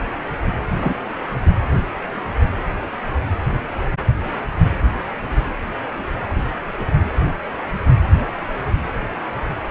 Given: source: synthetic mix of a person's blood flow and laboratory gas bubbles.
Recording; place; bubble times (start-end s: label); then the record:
Doppler ultrasound of blood flow; precordium
0.76-0.94 s: bubbles
From the record:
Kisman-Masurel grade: 113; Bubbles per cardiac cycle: 1 to 2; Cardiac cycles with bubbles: 1 to 10%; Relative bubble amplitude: loud (0.450 to 0.775); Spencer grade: 1 (occasional bubble signal discernible with the cardiac motion signal, with majority of cardiac periods free of bubbles); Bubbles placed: anywhere in the cardiac cycle